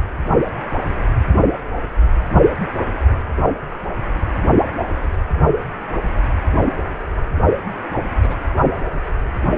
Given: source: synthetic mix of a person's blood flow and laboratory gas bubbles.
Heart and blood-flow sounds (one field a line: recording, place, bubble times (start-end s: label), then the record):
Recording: Doppler ultrasound of blood flow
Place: precordium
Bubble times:
8.22-8.37 s: bubbles
From the record:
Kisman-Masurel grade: 121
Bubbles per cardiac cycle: 1 to 2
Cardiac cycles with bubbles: 10 to 50%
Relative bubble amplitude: barely perceptible (0.100 to 0.250)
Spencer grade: 2 (many but less than half of the cardiac periods contain bubble signals, singularly or in groups)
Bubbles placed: anywhere in the cardiac cycle